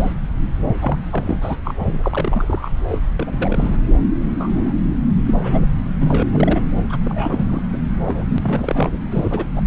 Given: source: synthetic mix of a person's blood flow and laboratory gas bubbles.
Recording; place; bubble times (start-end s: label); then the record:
Doppler ultrasound of blood flow; subclavian vein
0.00-0.12 s: bubbles
0.81-0.96 s: bubbles
1.11-1.38 s: bubbles
1.41-1.57 s: bubbles
1.65-1.74 s: bubbles
1.79-1.99 s: bubbles
2.02-2.70 s: bubbles
2.88-2.98 s: bubbles
3.16-3.76 s: bubbles
4.30-4.72 s: bubbles
5.25-5.34 s: bubbles
5.43-5.64 s: bubbles
6.01-6.62 s: bubbles
6.89-6.97 s: bubbles
7.04-7.61 s: bubbles
7.73-7.79 s: bubbles
8.05-8.38 s: bubbles
8.42-8.97 s: bubbles
9.11-9.50 s: bubbles
9.55-9.62 s: bubbles
From the record:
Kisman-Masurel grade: 232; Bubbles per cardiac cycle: several, 3 to 8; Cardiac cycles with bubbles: 50 to 99%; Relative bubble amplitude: moderate (0.250 to 0.450); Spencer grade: 3 (all of the cardiac periods contain showers or single bubble signals, but not dominating or overriding the cardiac motion signals); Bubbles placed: anywhere in the cardiac cycle